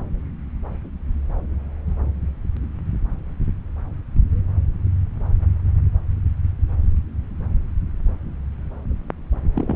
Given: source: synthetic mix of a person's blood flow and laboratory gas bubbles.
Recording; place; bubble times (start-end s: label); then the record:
Doppler ultrasound of blood flow; subclavian vein
9.55-9.76 s: bubbles
From the record:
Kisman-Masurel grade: 112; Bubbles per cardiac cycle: 1 to 2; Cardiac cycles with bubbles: 1 to 10%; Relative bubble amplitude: moderate (0.250 to 0.450); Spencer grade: 1 (occasional bubble signal discernible with the cardiac motion signal, with majority of cardiac periods free of bubbles); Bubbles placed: anywhere in the cardiac cycle